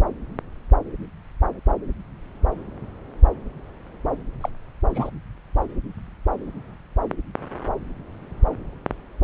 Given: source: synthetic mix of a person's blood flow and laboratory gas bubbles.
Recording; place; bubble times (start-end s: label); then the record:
Doppler ultrasound of blood flow; subclavian vein
4.41-4.50 s: bubbles
4.94-5.10 s: bubbles
From the record:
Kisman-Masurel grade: 122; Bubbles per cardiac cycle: 1 to 2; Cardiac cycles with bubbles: 10 to 50%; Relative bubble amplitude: moderate (0.250 to 0.450); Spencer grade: 2 (many but less than half of the cardiac periods contain bubble signals, singularly or in groups); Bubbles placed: anywhere in the cardiac cycle